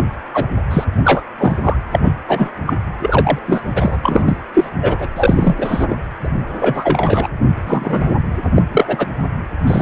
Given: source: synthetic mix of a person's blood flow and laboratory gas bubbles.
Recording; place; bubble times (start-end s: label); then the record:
Doppler ultrasound of blood flow; precordium
0.00-0.06 s: bubbles
0.33-0.46 s: bubbles
0.70-0.84 s: bubbles
1.04-1.23 s: bubbles
1.38-1.56 s: bubbles
1.62-1.77 s: bubbles
1.92-1.99 s: bubbles
2.04-2.12 s: bubbles
2.27-2.50 s: bubbles
2.67-2.77 s: bubbles
3.00-3.39 s: bubbles
3.47-3.62 s: bubbles
3.74-3.98 s: bubbles
4.03-4.39 s: bubbles
4.53-4.70 s: bubbles
4.81-5.07 s: bubbles
5.16-5.55 s: bubbles
5.58-5.86 s: bubbles
5.89-5.96 s: bubbles
6.23-6.29 s: bubbles
6.59-7.28 s: bubbles
7.67-8.15 s: bubbles
8.55-8.62 s: bubbles
8.71-9.08 s: bubbles
9.66-9.82 s: bubbles
From the record:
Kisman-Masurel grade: 243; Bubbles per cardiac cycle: several, 3 to 8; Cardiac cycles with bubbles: 100%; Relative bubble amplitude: loud (0.450 to 0.775); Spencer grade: 3 (all of the cardiac periods contain showers or single bubble signals, but not dominating or overriding the cardiac motion signals); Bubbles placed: anywhere in the cardiac cycle